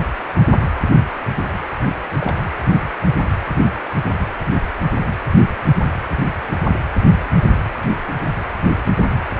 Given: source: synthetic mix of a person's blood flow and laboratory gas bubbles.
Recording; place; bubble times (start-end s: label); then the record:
Doppler ultrasound of blood flow; precordium
2.21-2.35 s: bubbles
From the record:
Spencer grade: 1 (occasional bubble signal discernible with the cardiac motion signal, with majority of cardiac periods free of bubbles); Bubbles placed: anywhere in the cardiac cycle